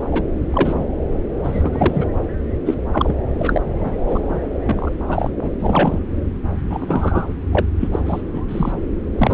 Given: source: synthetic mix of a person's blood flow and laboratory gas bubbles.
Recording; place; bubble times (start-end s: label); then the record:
Doppler ultrasound of blood flow; subclavian vein
0.12-0.24 s: bubbles
0.53-0.85 s: bubbles
1.44-2.06 s: bubbles
2.65-2.74 s: bubbles
2.93-3.15 s: bubbles
3.38-3.61 s: bubbles
3.73-4.46 s: bubbles
4.66-4.92 s: bubbles
5.08-5.31 s: bubbles
5.42-5.50 s: bubbles
5.59-5.99 s: bubbles
6.70-7.35 s: bubbles
7.53-7.66 s: bubbles
7.80-7.88 s: bubbles
7.93-8.00 s: bubbles
8.05-8.21 s: bubbles
8.34-8.42 s: bubbles
8.48-8.72 s: bubbles
9.18-9.34 s: bubbles
From the record:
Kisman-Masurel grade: 242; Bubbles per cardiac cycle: several, 3 to 8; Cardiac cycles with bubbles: 100%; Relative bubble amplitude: moderate (0.250 to 0.450); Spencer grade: 3 (all of the cardiac periods contain showers or single bubble signals, but not dominating or overriding the cardiac motion signals); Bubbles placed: anywhere in the cardiac cycle